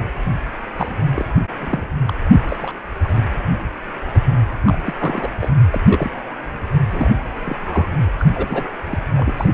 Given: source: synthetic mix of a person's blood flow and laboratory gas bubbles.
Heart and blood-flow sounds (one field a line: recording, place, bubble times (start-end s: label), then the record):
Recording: Doppler ultrasound of blood flow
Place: precordium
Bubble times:
0.78-0.96 s: bubbles
1.12-1.25 s: bubbles
1.60-1.86 s: bubbles
2.06-2.14 s: bubbles
2.49-2.57 s: bubbles
2.61-2.78 s: bubbles
3.04-3.22 s: bubbles
4.15-4.20 s: bubbles
4.66-4.79 s: bubbles
4.84-4.94 s: bubbles
4.98-5.31 s: bubbles
5.40-5.49 s: bubbles
5.71-5.81 s: bubbles
5.88-6.11 s: bubbles
6.91-7.09 s: bubbles
7.42-7.57 s: bubbles
7.59-7.88 s: bubbles
7.96-8.05 s: bubbles
8.19-8.66 s: bubbles
8.84-8.98 s: bubbles
9.17-9.49 s: bubbles
9.52-9.54 s: bubbles
From the record:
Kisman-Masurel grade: 242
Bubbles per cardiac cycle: several, 3 to 8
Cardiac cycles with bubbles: 100%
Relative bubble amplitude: moderate (0.250 to 0.450)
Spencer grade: 3 (all of the cardiac periods contain showers or single bubble signals, but not dominating or overriding the cardiac motion signals)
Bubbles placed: anywhere in the cardiac cycle